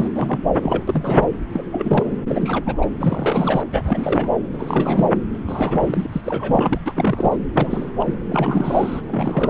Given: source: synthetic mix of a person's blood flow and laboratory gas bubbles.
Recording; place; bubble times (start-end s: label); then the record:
Doppler ultrasound of blood flow; subclavian vein
0.00-0.08 s: bubbles
0.14-0.40 s: bubbles
0.53-0.84 s: bubbles
0.88-1.29 s: bubbles
1.54-1.63 s: bubbles
1.72-2.13 s: bubbles
2.27-2.89 s: bubbles
3.00-3.64 s: bubbles
3.70-4.29 s: bubbles
4.52-5.08 s: bubbles
5.33-5.39 s: bubbles
5.46-6.06 s: bubbles
6.12-6.21 s: bubbles
6.24-6.79 s: bubbles
6.86-6.93 s: bubbles
6.96-7.38 s: bubbles
7.54-7.90 s: bubbles
7.99-8.14 s: bubbles
8.30-9.00 s: bubbles
9.08-9.50 s: bubbles
From the record:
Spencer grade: 3 (all of the cardiac periods contain showers or single bubble signals, but not dominating or overriding the cardiac motion signals); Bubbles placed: anywhere in the cardiac cycle